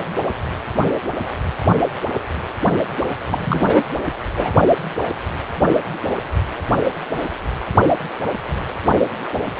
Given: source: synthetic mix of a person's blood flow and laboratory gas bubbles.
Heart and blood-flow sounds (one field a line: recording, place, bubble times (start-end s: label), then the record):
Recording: Doppler ultrasound of blood flow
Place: precordium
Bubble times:
3.29-3.81 s: bubbles
4.36-4.54 s: bubbles
From the record:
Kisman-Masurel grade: 212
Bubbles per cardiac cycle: several, 3 to 8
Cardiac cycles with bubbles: 1 to 10%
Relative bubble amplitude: moderate (0.250 to 0.450)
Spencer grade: 1 (occasional bubble signal discernible with the cardiac motion signal, with majority of cardiac periods free of bubbles)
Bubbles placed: only in the low amplitude regions of the cardiac cycle